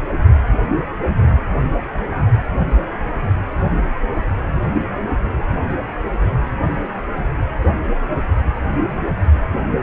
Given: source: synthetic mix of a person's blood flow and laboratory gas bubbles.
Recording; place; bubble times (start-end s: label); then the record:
Doppler ultrasound of blood flow; precordium
no bubbles
From the record:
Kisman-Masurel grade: 000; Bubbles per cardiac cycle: 0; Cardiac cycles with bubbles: 0%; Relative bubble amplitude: no bubbles discernible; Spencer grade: 0 (complete lack of bubble signals)